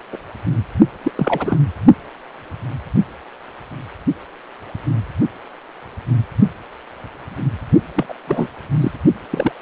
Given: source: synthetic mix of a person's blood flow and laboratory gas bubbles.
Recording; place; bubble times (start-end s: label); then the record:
Doppler ultrasound of blood flow; precordium
0.12-0.17 s: bubbles
1.02-1.11 s: bubbles
1.16-1.57 s: bubbles
7.95-8.06 s: bubbles
8.09-8.14 s: bubbles
8.27-8.50 s: bubbles
8.80-8.91 s: bubbles
9.30-9.52 s: bubbles
From the record:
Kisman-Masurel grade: 232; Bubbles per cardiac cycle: several, 3 to 8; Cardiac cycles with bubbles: 50 to 99%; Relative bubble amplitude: moderate (0.250 to 0.450); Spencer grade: 3 (all of the cardiac periods contain showers or single bubble signals, but not dominating or overriding the cardiac motion signals); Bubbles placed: only in the low amplitude regions of the cardiac cycle